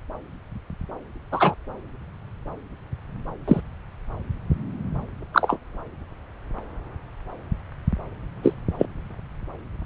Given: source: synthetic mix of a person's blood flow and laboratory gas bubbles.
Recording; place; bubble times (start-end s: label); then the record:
Doppler ultrasound of blood flow; subclavian vein
1.31-1.54 s: bubbles
3.48-3.60 s: bubbles
5.33-5.58 s: bubbles
8.43-8.54 s: bubbles
8.78-8.86 s: bubbles
From the record:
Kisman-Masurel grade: 123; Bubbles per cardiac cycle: 1 to 2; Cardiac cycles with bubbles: 10 to 50%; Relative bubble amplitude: loud (0.450 to 0.775); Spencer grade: 2 (many but less than half of the cardiac periods contain bubble signals, singularly or in groups); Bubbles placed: anywhere in the cardiac cycle